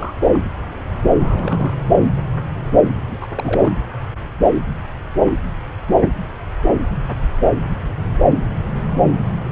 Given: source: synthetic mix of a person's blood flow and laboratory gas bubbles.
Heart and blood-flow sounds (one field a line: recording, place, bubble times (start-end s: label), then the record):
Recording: Doppler ultrasound of blood flow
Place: subclavian vein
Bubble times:
0.00-0.38 s: bubbles
1.20-1.77 s: bubbles
3.08-3.18 s: bubbles
3.21-3.27 s: bubbles
3.35-3.73 s: bubbles
From the record:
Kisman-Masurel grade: 221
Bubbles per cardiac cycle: several, 3 to 8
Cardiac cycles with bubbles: 10 to 50%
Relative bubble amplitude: barely perceptible (0.100 to 0.250)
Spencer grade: 2 (many but less than half of the cardiac periods contain bubble signals, singularly or in groups)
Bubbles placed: anywhere in the cardiac cycle